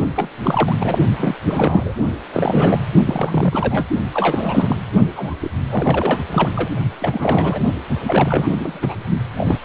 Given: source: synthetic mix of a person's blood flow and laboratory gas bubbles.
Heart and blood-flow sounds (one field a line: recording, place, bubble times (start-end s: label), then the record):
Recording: Doppler ultrasound of blood flow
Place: precordium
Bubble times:
0.15-0.30 s: bubbles
0.43-0.76 s: bubbles
0.78-0.98 s: bubbles
1.17-1.35 s: bubbles
1.45-1.94 s: bubbles
2.32-2.82 s: bubbles
3.05-3.87 s: bubbles
4.13-4.76 s: bubbles
5.16-5.34 s: bubbles
5.40-5.51 s: bubbles
5.71-6.21 s: bubbles
6.32-6.51 s: bubbles
6.54-6.70 s: bubbles
7.00-7.60 s: bubbles
7.66-7.79 s: bubbles
8.05-8.79 s: bubbles
8.82-8.95 s: bubbles
9.37-9.58 s: bubbles
From the record:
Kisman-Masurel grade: 342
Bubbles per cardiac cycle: rolling drumbeat, 9 or more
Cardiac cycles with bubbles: 100%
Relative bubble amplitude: moderate (0.250 to 0.450)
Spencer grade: 3 (all of the cardiac periods contain showers or single bubble signals, but not dominating or overriding the cardiac motion signals)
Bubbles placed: only in the low amplitude regions of the cardiac cycle